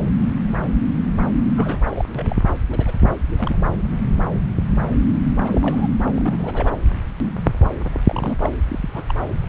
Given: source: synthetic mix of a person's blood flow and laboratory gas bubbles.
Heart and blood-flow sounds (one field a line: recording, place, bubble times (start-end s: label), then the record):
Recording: Doppler ultrasound of blood flow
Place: subclavian vein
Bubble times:
1.56-2.05 s: bubbles
2.15-2.42 s: bubbles
2.71-2.92 s: bubbles
3.38-3.56 s: bubbles
5.45-5.88 s: bubbles
6.09-6.75 s: bubbles
8.04-8.49 s: bubbles
8.68-8.79 s: bubbles
8.81-8.90 s: bubbles
8.94-9.03 s: bubbles
9.08-9.13 s: bubbles
9.21-9.26 s: bubbles
From the record:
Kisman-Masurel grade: 221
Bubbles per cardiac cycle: several, 3 to 8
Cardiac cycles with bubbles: 10 to 50%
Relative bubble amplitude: barely perceptible (0.100 to 0.250)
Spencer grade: 2 (many but less than half of the cardiac periods contain bubble signals, singularly or in groups)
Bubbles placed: anywhere in the cardiac cycle